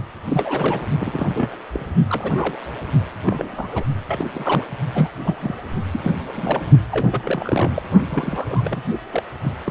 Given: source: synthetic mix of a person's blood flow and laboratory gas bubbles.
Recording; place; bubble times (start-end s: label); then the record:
Doppler ultrasound of blood flow; precordium
0.24-0.84 s: bubbles
0.98-1.57 s: bubbles
1.73-1.86 s: bubbles
2.09-2.58 s: bubbles
3.24-3.84 s: bubbles
4.08-4.26 s: bubbles
4.33-4.66 s: bubbles
4.93-5.08 s: bubbles
5.25-5.55 s: bubbles
5.92-6.12 s: bubbles
6.33-6.63 s: bubbles
6.92-7.70 s: bubbles
7.74-7.83 s: bubbles
8.09-8.81 s: bubbles
9.12-9.22 s: bubbles
9.42-9.53 s: bubbles
9.64-9.71 s: bubbles
From the record:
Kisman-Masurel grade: 242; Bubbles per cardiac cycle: several, 3 to 8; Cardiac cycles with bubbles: 100%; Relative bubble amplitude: moderate (0.250 to 0.450); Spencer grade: 3 (all of the cardiac periods contain showers or single bubble signals, but not dominating or overriding the cardiac motion signals); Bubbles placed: only in the low amplitude regions of the cardiac cycle